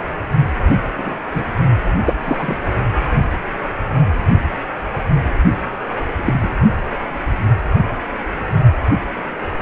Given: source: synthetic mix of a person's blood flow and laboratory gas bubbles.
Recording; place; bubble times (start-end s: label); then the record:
Doppler ultrasound of blood flow; precordium
0.98-1.20 s: bubbles
1.31-1.46 s: bubbles
2.06-2.15 s: bubbles
2.23-2.57 s: bubbles
6.16-6.50 s: bubbles
From the record:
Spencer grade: 2 (many but less than half of the cardiac periods contain bubble signals, singularly or in groups); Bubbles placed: only in the low amplitude regions of the cardiac cycle